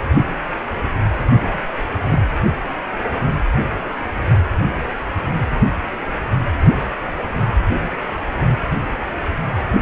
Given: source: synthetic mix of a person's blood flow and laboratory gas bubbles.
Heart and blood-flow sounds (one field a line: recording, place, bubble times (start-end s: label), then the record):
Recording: Doppler ultrasound of blood flow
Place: precordium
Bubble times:
1.42-1.58 s: bubbles
2.06-2.19 s: bubbles
From the record:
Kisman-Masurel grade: 111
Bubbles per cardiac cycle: 1 to 2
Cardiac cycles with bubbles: 1 to 10%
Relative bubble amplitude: barely perceptible (0.100 to 0.250)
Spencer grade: 1 (occasional bubble signal discernible with the cardiac motion signal, with majority of cardiac periods free of bubbles)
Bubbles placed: only in the low amplitude regions of the cardiac cycle